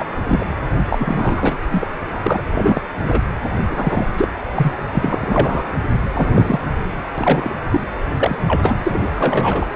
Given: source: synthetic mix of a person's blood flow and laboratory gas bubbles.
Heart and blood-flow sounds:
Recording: Doppler ultrasound of blood flow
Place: precordium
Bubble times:
0.00-0.05 s: bubbles
0.25-0.47 s: bubbles
0.85-1.57 s: bubbles
1.72-1.87 s: bubbles
2.15-2.20 s: bubbles
2.23-2.41 s: bubbles
2.53-2.81 s: bubbles
3.04-3.24 s: bubbles
3.70-4.07 s: bubbles
4.16-4.28 s: bubbles
4.55-4.76 s: bubbles
4.92-5.18 s: bubbles
5.21-5.63 s: bubbles
6.14-6.59 s: bubbles
7.17-7.54 s: bubbles
7.71-7.80 s: bubbles
8.15-8.38 s: bubbles
8.47-8.74 s: bubbles
8.83-9.66 s: bubbles
From the record:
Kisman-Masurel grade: 243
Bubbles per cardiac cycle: several, 3 to 8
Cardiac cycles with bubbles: 100%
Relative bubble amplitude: loud (0.450 to 0.775)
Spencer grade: 3 (all of the cardiac periods contain showers or single bubble signals, but not dominating or overriding the cardiac motion signals)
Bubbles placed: anywhere in the cardiac cycle

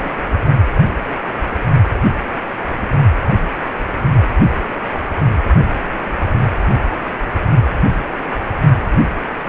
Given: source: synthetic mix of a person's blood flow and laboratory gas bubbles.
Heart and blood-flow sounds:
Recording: Doppler ultrasound of blood flow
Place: precordium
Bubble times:
0.00-0.15 s: bubbles
From the record:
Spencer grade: 2 (many but less than half of the cardiac periods contain bubble signals, singularly or in groups)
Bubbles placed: only in the low amplitude regions of the cardiac cycle

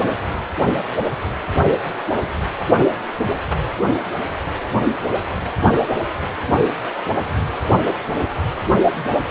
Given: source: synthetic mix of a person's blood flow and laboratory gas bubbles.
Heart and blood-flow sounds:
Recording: Doppler ultrasound of blood flow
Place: precordium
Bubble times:
no bubbles
From the record:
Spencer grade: 0 (complete lack of bubble signals)

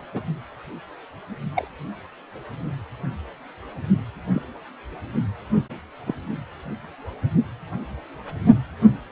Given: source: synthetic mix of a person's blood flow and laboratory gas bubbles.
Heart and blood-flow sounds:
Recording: Doppler ultrasound of blood flow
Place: precordium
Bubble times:
0.14-0.22 s: bubbles
1.55-1.68 s: bubbles
4.33-4.42 s: bubbles
6.05-6.15 s: bubbles
From the record:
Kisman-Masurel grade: 121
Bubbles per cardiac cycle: 1 to 2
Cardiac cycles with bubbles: 10 to 50%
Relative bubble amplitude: barely perceptible (0.100 to 0.250)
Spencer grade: 2 (many but less than half of the cardiac periods contain bubble signals, singularly or in groups)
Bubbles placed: only in the low amplitude regions of the cardiac cycle

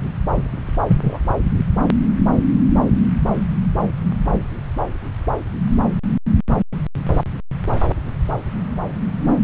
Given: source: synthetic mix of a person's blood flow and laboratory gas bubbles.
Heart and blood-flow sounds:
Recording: Doppler ultrasound of blood flow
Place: subclavian vein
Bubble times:
0.88-1.19 s: bubbles
From the record:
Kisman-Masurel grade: 113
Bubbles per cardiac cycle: 1 to 2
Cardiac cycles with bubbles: 1 to 10%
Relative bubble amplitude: loud (0.450 to 0.775)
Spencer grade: 1 (occasional bubble signal discernible with the cardiac motion signal, with majority of cardiac periods free of bubbles)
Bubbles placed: anywhere in the cardiac cycle

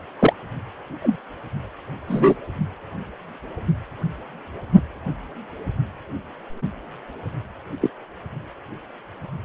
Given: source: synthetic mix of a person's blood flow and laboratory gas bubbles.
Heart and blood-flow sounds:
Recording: Doppler ultrasound of blood flow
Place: precordium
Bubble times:
0.19-0.33 s: bubbles
1.01-1.17 s: bubbles
2.07-2.35 s: bubbles
7.80-7.90 s: bubbles
From the record:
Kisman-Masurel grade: 123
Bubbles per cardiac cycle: 1 to 2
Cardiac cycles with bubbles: 10 to 50%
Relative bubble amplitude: loud (0.450 to 0.775)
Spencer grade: 2 (many but less than half of the cardiac periods contain bubble signals, singularly or in groups)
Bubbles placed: only in the low amplitude regions of the cardiac cycle

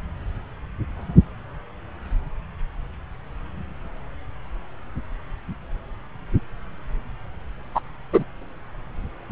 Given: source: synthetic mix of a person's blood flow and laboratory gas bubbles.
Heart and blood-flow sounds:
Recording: Doppler ultrasound of blood flow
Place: subclavian vein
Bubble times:
7.75-7.81 s: bubbles
8.12-8.24 s: bubbles
From the record:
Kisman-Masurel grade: 113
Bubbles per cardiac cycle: 1 to 2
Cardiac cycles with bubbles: 1 to 10%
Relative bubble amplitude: loud (0.450 to 0.775)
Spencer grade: 1 (occasional bubble signal discernible with the cardiac motion signal, with majority of cardiac periods free of bubbles)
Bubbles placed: anywhere in the cardiac cycle

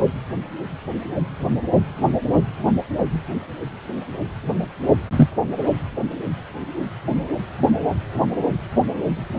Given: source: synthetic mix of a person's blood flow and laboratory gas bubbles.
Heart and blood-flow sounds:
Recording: Doppler ultrasound of blood flow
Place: precordium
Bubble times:
5.11-5.29 s: bubbles
From the record:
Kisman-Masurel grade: 113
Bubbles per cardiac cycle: 1 to 2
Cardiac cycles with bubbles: 1 to 10%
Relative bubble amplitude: loud (0.450 to 0.775)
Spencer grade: 1 (occasional bubble signal discernible with the cardiac motion signal, with majority of cardiac periods free of bubbles)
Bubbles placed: anywhere in the cardiac cycle

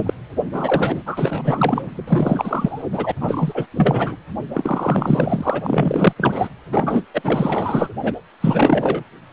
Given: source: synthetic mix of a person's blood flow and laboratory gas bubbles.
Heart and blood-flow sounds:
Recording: Doppler ultrasound of blood flow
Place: precordium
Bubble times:
0.00-0.14 s: bubbles
0.52-1.02 s: bubbles
1.06-2.82 s: bubbles
2.92-3.12 s: bubbles
3.21-3.67 s: bubbles
3.76-4.17 s: bubbles
4.53-6.13 s: bubbles
6.17-6.49 s: bubbles
6.71-7.05 s: bubbles
7.13-7.94 s: bubbles
8.03-8.13 s: bubbles
8.40-9.04 s: bubbles
From the record:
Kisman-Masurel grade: 444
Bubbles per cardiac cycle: continuous sound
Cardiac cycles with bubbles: 100%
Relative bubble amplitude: maximal (0.775 to 0.999)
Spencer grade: 4 (maximum detectable bubble signal sounding continuously throughout systole and diastole of every cardiac period, and overriding the amplitude of the normal cardiac signals)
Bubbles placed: anywhere in the cardiac cycle

